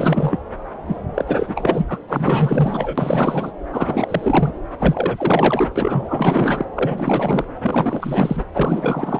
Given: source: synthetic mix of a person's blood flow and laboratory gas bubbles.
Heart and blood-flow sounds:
Doppler ultrasound of blood flow; subclavian vein
0.00-0.40 s: bubbles
0.87-1.02 s: bubbles
1.14-1.99 s: bubbles
2.08-3.52 s: bubbles
3.72-4.54 s: bubbles
4.78-5.68 s: bubbles
5.75-6.65 s: bubbles
6.75-7.44 s: bubbles
7.62-8.44 s: bubbles
8.53-9.19 s: bubbles
From the record:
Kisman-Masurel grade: 444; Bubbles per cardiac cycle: continuous sound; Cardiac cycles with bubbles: 100%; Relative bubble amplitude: maximal (0.775 to 0.999); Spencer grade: 4 (maximum detectable bubble signal sounding continuously throughout systole and diastole of every cardiac period, and overriding the amplitude of the normal cardiac signals); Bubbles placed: anywhere in the cardiac cycle

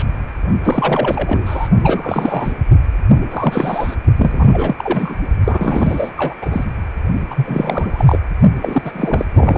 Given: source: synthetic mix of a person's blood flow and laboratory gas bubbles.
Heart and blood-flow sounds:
Doppler ultrasound of blood flow; precordium
0.00-0.04 s: bubbles
0.64-1.69 s: bubbles
1.83-2.53 s: bubbles
3.31-3.96 s: bubbles
4.18-5.16 s: bubbles
5.44-6.12 s: bubbles
6.17-6.35 s: bubbles
6.42-6.65 s: bubbles
7.30-8.19 s: bubbles
8.61-9.25 s: bubbles
9.33-9.57 s: bubbles
From the record:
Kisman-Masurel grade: 343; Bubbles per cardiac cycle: rolling drumbeat, 9 or more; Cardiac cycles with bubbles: 100%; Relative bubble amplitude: loud (0.450 to 0.775); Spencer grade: 3 (all of the cardiac periods contain showers or single bubble signals, but not dominating or overriding the cardiac motion signals); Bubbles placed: only in the low amplitude regions of the cardiac cycle

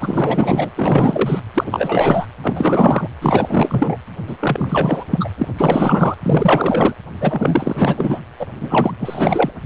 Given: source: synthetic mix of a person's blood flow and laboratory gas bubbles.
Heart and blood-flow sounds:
Doppler ultrasound of blood flow; precordium
0.01-0.71 s: bubbles
0.76-1.40 s: bubbles
1.54-2.26 s: bubbles
2.42-3.07 s: bubbles
3.21-3.97 s: bubbles
4.27-5.04 s: bubbles
5.10-5.29 s: bubbles
5.38-5.48 s: bubbles
5.57-6.16 s: bubbles
6.24-6.94 s: bubbles
7.20-8.21 s: bubbles
8.39-8.47 s: bubbles
8.61-8.94 s: bubbles
9.00-9.51 s: bubbles
From the record:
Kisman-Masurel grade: 444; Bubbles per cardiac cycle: continuous sound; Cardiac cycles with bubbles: 100%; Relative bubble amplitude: maximal (0.775 to 0.999); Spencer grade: 4 (maximum detectable bubble signal sounding continuously throughout systole and diastole of every cardiac period, and overriding the amplitude of the normal cardiac signals); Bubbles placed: anywhere in the cardiac cycle

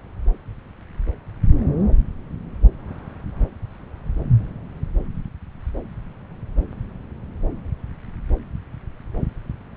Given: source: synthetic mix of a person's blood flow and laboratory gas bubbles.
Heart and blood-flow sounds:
Doppler ultrasound of blood flow; subclavian vein
no bubbles
From the record:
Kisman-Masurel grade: 000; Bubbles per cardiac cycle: 0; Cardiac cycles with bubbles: 0%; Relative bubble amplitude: no bubbles discernible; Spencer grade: 0 (complete lack of bubble signals)

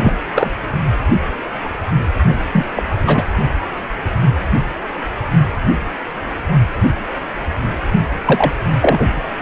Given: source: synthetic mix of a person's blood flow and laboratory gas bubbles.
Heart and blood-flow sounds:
Doppler ultrasound of blood flow; precordium
0.00-0.13 s: bubbles
0.35-0.52 s: bubbles
2.52-2.65 s: bubbles
2.75-2.83 s: bubbles
3.05-3.25 s: bubbles
8.25-8.53 s: bubbles
8.81-9.23 s: bubbles
From the record:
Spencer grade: 3 (all of the cardiac periods contain showers or single bubble signals, but not dominating or overriding the cardiac motion signals); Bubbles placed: only in the low amplitude regions of the cardiac cycle

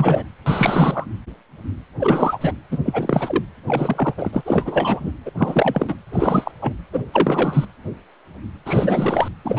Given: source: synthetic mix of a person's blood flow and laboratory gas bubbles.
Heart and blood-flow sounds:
Doppler ultrasound of blood flow; precordium
0.00-0.23 s: bubbles
0.46-1.06 s: bubbles
1.98-2.53 s: bubbles
2.71-2.79 s: bubbles
2.85-3.44 s: bubbles
3.67-4.14 s: bubbles
4.17-4.41 s: bubbles
4.45-5.12 s: bubbles
5.25-5.31 s: bubbles
5.38-5.96 s: bubbles
6.12-6.51 s: bubbles
6.62-6.74 s: bubbles
6.92-7.04 s: bubbles
7.12-7.65 s: bubbles
8.65-9.28 s: bubbles
9.45-9.59 s: bubbles
From the record:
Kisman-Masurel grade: 333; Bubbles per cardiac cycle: rolling drumbeat, 9 or more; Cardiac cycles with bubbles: 50 to 99%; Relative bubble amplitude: loud (0.450 to 0.775); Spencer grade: 3 (all of the cardiac periods contain showers or single bubble signals, but not dominating or overriding the cardiac motion signals); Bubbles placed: anywhere in the cardiac cycle

